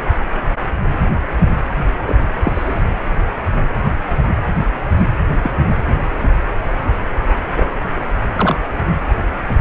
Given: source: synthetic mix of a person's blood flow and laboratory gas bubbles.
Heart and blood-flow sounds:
Doppler ultrasound of blood flow; precordium
2.06-2.15 s: bubbles
2.44-2.81 s: bubbles
5.42-5.51 s: bubbles
7.57-7.66 s: bubbles
8.33-8.56 s: bubbles
From the record:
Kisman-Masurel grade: 122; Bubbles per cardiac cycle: 1 to 2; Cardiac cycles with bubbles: 10 to 50%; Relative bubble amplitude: moderate (0.250 to 0.450); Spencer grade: 2 (many but less than half of the cardiac periods contain bubble signals, singularly or in groups); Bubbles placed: anywhere in the cardiac cycle

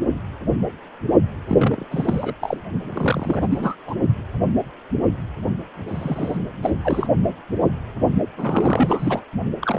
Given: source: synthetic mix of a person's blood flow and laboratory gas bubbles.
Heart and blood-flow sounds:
Doppler ultrasound of blood flow; precordium
1.49-1.84 s: bubbles
1.91-2.34 s: bubbles
2.41-2.57 s: bubbles
2.94-3.75 s: bubbles
3.86-3.94 s: bubbles
5.88-6.38 s: bubbles
6.62-6.71 s: bubbles
6.84-7.07 s: bubbles
8.37-9.20 s: bubbles
9.62-9.78 s: bubbles
From the record:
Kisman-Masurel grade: 332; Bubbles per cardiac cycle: rolling drumbeat, 9 or more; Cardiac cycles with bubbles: 50 to 99%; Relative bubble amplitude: moderate (0.250 to 0.450); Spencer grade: 3 (all of the cardiac periods contain showers or single bubble signals, but not dominating or overriding the cardiac motion signals); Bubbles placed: only in the low amplitude regions of the cardiac cycle

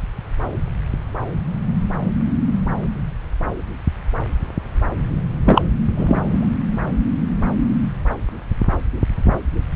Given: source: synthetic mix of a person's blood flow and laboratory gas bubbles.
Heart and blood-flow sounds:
Doppler ultrasound of blood flow; subclavian vein
5.46-5.62 s: bubbles
5.97-6.47 s: bubbles
From the record:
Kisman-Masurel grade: 213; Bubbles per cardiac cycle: several, 3 to 8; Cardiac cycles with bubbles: 1 to 10%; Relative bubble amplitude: loud (0.450 to 0.775); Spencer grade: 1 (occasional bubble signal discernible with the cardiac motion signal, with majority of cardiac periods free of bubbles); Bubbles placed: anywhere in the cardiac cycle

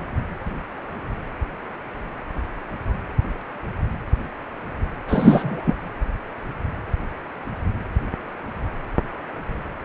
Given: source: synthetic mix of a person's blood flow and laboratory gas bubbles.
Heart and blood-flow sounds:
Doppler ultrasound of blood flow; precordium
5.08-5.75 s: bubbles
From the record:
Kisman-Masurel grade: 213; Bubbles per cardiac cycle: several, 3 to 8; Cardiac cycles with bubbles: 1 to 10%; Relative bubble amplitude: loud (0.450 to 0.775); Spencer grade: 1 (occasional bubble signal discernible with the cardiac motion signal, with majority of cardiac periods free of bubbles); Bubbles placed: anywhere in the cardiac cycle

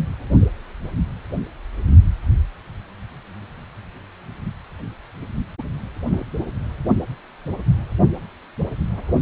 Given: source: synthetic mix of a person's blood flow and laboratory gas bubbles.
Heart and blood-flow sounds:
Doppler ultrasound of blood flow; precordium
6.10-6.25 s: bubbles
From the record:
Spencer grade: 1 (occasional bubble signal discernible with the cardiac motion signal, with majority of cardiac periods free of bubbles); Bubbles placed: only in the low amplitude regions of the cardiac cycle

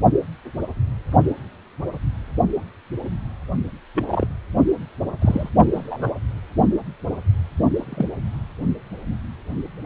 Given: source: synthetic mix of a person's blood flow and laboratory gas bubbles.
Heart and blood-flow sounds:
Doppler ultrasound of blood flow; precordium
3.95-4.26 s: bubbles
5.21-5.49 s: bubbles
5.73-6.12 s: bubbles
7.75-8.09 s: bubbles
From the record:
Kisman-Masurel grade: 122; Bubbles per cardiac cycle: 1 to 2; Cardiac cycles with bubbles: 10 to 50%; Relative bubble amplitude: moderate (0.250 to 0.450); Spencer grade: 2 (many but less than half of the cardiac periods contain bubble signals, singularly or in groups); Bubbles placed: only in the low amplitude regions of the cardiac cycle

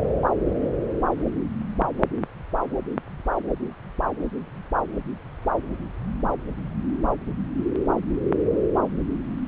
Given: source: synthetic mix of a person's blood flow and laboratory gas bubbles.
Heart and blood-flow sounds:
Doppler ultrasound of blood flow; subclavian vein
no bubbles
From the record:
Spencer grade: 0 (complete lack of bubble signals)

